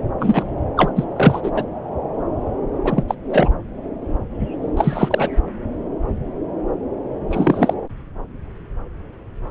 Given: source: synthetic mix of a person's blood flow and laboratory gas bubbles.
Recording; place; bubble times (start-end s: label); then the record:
Doppler ultrasound of blood flow; subclavian vein
0.19-0.44 s: bubbles
0.77-0.92 s: bubbles
0.95-1.04 s: bubbles
1.16-1.50 s: bubbles
1.53-1.66 s: bubbles
2.84-3.04 s: bubbles
3.08-3.15 s: bubbles
3.29-3.50 s: bubbles
4.76-5.28 s: bubbles
7.30-7.73 s: bubbles
From the record:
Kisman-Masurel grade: 223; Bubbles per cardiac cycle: several, 3 to 8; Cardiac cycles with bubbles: 10 to 50%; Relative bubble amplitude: loud (0.450 to 0.775); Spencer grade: 2 (many but less than half of the cardiac periods contain bubble signals, singularly or in groups); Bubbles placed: anywhere in the cardiac cycle